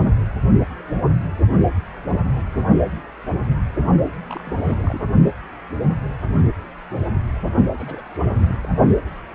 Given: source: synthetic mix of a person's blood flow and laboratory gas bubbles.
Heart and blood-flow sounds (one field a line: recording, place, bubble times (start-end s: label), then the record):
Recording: Doppler ultrasound of blood flow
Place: precordium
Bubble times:
4.29-5.01 s: bubbles
7.77-8.03 s: bubbles
8.16-8.19 s: bubbles
8.22-8.69 s: bubbles
From the record:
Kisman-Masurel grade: 221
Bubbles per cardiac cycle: several, 3 to 8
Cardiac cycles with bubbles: 10 to 50%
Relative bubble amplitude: barely perceptible (0.100 to 0.250)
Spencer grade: 2 (many but less than half of the cardiac periods contain bubble signals, singularly or in groups)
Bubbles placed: only in the low amplitude regions of the cardiac cycle